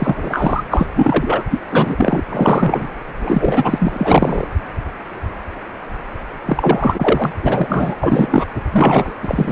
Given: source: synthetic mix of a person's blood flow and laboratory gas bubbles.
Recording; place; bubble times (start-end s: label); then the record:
Doppler ultrasound of blood flow; precordium
0.00-0.62 s: bubbles
0.70-0.87 s: bubbles
0.94-1.43 s: bubbles
1.50-1.60 s: bubbles
1.70-2.23 s: bubbles
2.29-2.88 s: bubbles
3.20-4.47 s: bubbles
6.46-7.32 s: bubbles
7.42-7.96 s: bubbles
8.01-8.46 s: bubbles
8.72-9.12 s: bubbles
9.22-9.52 s: bubbles
From the record:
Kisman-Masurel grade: 333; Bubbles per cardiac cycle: rolling drumbeat, 9 or more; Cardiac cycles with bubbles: 50 to 99%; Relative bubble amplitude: loud (0.450 to 0.775); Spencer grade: 3 (all of the cardiac periods contain showers or single bubble signals, but not dominating or overriding the cardiac motion signals); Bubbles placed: anywhere in the cardiac cycle